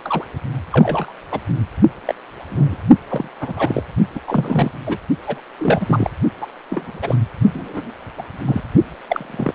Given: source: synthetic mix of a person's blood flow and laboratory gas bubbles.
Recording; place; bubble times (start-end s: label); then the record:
Doppler ultrasound of blood flow; precordium
0.05-0.24 s: bubbles
0.71-1.13 s: bubbles
1.31-1.40 s: bubbles
2.05-2.15 s: bubbles
2.50-2.79 s: bubbles
3.08-3.28 s: bubbles
3.40-3.54 s: bubbles
3.56-3.83 s: bubbles
4.15-4.20 s: bubbles
4.27-4.72 s: bubbles
4.86-4.97 s: bubbles
5.26-5.41 s: bubbles
5.59-6.11 s: bubbles
6.41-6.47 s: bubbles
6.70-7.16 s: bubbles
7.53-7.93 s: bubbles
8.17-8.22 s: bubbles
8.46-8.62 s: bubbles
9.09-9.54 s: bubbles
From the record:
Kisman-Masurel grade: 232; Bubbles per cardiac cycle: several, 3 to 8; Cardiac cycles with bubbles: 50 to 99%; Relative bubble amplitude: moderate (0.250 to 0.450); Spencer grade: 3 (all of the cardiac periods contain showers or single bubble signals, but not dominating or overriding the cardiac motion signals); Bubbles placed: only in the low amplitude regions of the cardiac cycle